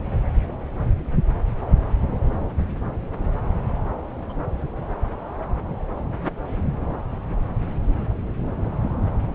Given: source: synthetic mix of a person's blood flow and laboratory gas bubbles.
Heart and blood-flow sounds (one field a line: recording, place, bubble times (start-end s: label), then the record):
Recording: Doppler ultrasound of blood flow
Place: subclavian vein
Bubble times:
3.97-4.51 s: bubbles
From the record:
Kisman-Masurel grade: 211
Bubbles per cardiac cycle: several, 3 to 8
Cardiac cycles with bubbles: 1 to 10%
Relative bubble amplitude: barely perceptible (0.100 to 0.250)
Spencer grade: 1 (occasional bubble signal discernible with the cardiac motion signal, with majority of cardiac periods free of bubbles)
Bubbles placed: anywhere in the cardiac cycle